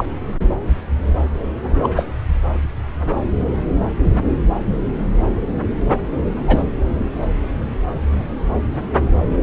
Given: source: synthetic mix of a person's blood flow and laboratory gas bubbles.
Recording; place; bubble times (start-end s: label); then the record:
Doppler ultrasound of blood flow; subclavian vein
0.00-0.06 s: bubbles
1.82-1.89 s: bubbles
1.96-2.05 s: bubbles
6.47-6.63 s: bubbles
From the record:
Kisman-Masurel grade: 123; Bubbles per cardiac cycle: 1 to 2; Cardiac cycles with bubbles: 10 to 50%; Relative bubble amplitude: loud (0.450 to 0.775); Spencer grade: 2 (many but less than half of the cardiac periods contain bubble signals, singularly or in groups); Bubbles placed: anywhere in the cardiac cycle